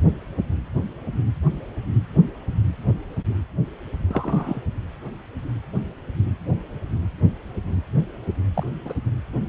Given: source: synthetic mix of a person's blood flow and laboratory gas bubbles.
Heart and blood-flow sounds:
Doppler ultrasound of blood flow; precordium
4.08-4.61 s: bubbles
8.54-8.63 s: bubbles
8.85-8.93 s: bubbles
From the record:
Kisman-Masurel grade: 112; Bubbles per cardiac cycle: 1 to 2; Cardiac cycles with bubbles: 1 to 10%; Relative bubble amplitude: moderate (0.250 to 0.450); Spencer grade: 1 (occasional bubble signal discernible with the cardiac motion signal, with majority of cardiac periods free of bubbles); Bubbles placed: anywhere in the cardiac cycle

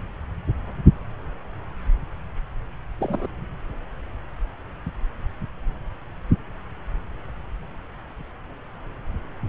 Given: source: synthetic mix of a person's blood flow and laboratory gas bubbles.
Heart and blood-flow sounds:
Doppler ultrasound of blood flow; subclavian vein
2.99-3.27 s: bubbles
From the record:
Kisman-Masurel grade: 112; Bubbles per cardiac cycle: 1 to 2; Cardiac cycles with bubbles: 1 to 10%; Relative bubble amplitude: moderate (0.250 to 0.450); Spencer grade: 1 (occasional bubble signal discernible with the cardiac motion signal, with majority of cardiac periods free of bubbles); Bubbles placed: anywhere in the cardiac cycle

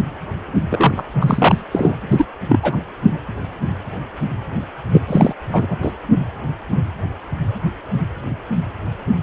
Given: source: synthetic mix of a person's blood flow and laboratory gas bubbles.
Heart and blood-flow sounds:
Doppler ultrasound of blood flow; precordium
0.69-1.03 s: bubbles
1.21-1.63 s: bubbles
1.72-1.95 s: bubbles
2.10-2.27 s: bubbles
2.48-2.77 s: bubbles
4.93-5.01 s: bubbles
5.07-5.34 s: bubbles
5.53-5.77 s: bubbles
5.81-5.92 s: bubbles
From the record:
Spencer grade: 2 (many but less than half of the cardiac periods contain bubble signals, singularly or in groups); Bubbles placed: anywhere in the cardiac cycle

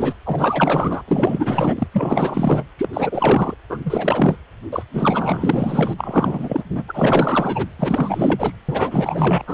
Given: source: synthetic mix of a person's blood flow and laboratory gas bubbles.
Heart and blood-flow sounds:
Doppler ultrasound of blood flow; precordium
0.00-0.15 s: bubbles
0.25-1.02 s: bubbles
1.07-1.87 s: bubbles
1.92-2.63 s: bubbles
2.77-2.88 s: bubbles
2.93-3.54 s: bubbles
3.69-3.78 s: bubbles
3.85-4.38 s: bubbles
4.72-4.83 s: bubbles
4.93-5.93 s: bubbles
5.97-6.63 s: bubbles
6.70-6.83 s: bubbles
6.87-7.67 s: bubbles
7.79-8.56 s: bubbles
8.69-9.44 s: bubbles
9.47-9.54 s: bubbles
From the record:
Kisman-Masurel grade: 444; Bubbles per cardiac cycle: continuous sound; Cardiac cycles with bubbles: 100%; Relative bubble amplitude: maximal (0.775 to 0.999); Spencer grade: 4 (maximum detectable bubble signal sounding continuously throughout systole and diastole of every cardiac period, and overriding the amplitude of the normal cardiac signals); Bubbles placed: anywhere in the cardiac cycle

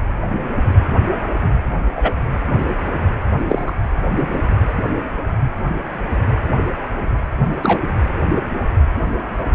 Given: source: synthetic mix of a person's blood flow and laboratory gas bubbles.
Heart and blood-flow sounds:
Doppler ultrasound of blood flow; precordium
1.94-2.13 s: bubbles
3.49-3.72 s: bubbles
7.62-7.78 s: bubbles
From the record:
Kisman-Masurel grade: 123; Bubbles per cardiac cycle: 1 to 2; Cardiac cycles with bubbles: 10 to 50%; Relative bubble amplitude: loud (0.450 to 0.775); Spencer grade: 2 (many but less than half of the cardiac periods contain bubble signals, singularly or in groups); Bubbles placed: anywhere in the cardiac cycle

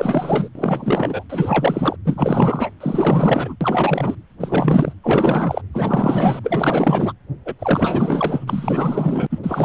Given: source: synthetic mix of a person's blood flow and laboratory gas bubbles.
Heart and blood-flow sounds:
Doppler ultrasound of blood flow; precordium
0.00-0.49 s: bubbles
0.55-1.24 s: bubbles
1.30-1.97 s: bubbles
2.04-2.70 s: bubbles
2.80-3.56 s: bubbles
3.60-4.15 s: bubbles
4.40-4.93 s: bubbles
5.04-5.62 s: bubbles
5.73-6.40 s: bubbles
6.43-7.12 s: bubbles
7.45-7.54 s: bubbles
7.59-9.27 s: bubbles
9.30-9.39 s: bubbles
9.43-9.65 s: bubbles
From the record:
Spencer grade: 4 (maximum detectable bubble signal sounding continuously throughout systole and diastole of every cardiac period, and overriding the amplitude of the normal cardiac signals); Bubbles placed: anywhere in the cardiac cycle

